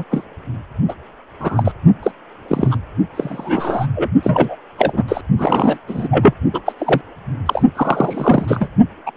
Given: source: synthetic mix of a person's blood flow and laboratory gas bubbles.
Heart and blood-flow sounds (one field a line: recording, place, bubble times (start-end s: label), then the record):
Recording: Doppler ultrasound of blood flow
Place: precordium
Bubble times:
0.00-0.04 s: bubbles
0.11-0.24 s: bubbles
0.88-0.94 s: bubbles
1.40-1.72 s: bubbles
2.02-2.12 s: bubbles
2.48-2.76 s: bubbles
3.15-3.87 s: bubbles
3.96-4.11 s: bubbles
4.23-4.56 s: bubbles
4.78-5.03 s: bubbles
5.08-5.21 s: bubbles
5.38-5.78 s: bubbles
5.88-6.33 s: bubbles
6.53-6.61 s: bubbles
6.66-6.73 s: bubbles
6.78-7.01 s: bubbles
7.46-7.63 s: bubbles
7.75-8.68 s: bubbles
9.06-9.11 s: bubbles
From the record:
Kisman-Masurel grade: 243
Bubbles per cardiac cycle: several, 3 to 8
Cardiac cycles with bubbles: 100%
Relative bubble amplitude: loud (0.450 to 0.775)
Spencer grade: 3 (all of the cardiac periods contain showers or single bubble signals, but not dominating or overriding the cardiac motion signals)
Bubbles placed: only in the low amplitude regions of the cardiac cycle